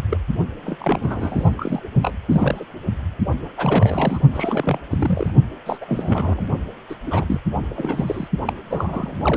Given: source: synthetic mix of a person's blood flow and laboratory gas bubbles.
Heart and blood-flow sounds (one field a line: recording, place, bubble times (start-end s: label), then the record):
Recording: Doppler ultrasound of blood flow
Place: precordium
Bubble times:
0.10-0.17 s: bubbles
0.64-0.77 s: bubbles
0.80-1.54 s: bubbles
1.57-1.80 s: bubbles
2.02-2.13 s: bubbles
2.29-2.65 s: bubbles
3.57-4.19 s: bubbles
4.33-4.79 s: bubbles
4.91-5.30 s: bubbles
5.66-5.77 s: bubbles
5.81-6.47 s: bubbles
6.89-6.96 s: bubbles
7.07-7.40 s: bubbles
7.70-8.28 s: bubbles
8.46-8.53 s: bubbles
8.71-9.37 s: bubbles
From the record:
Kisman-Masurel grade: 342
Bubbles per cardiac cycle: rolling drumbeat, 9 or more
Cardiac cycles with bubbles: 100%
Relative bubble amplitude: moderate (0.250 to 0.450)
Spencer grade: 3 (all of the cardiac periods contain showers or single bubble signals, but not dominating or overriding the cardiac motion signals)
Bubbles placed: only in the low amplitude regions of the cardiac cycle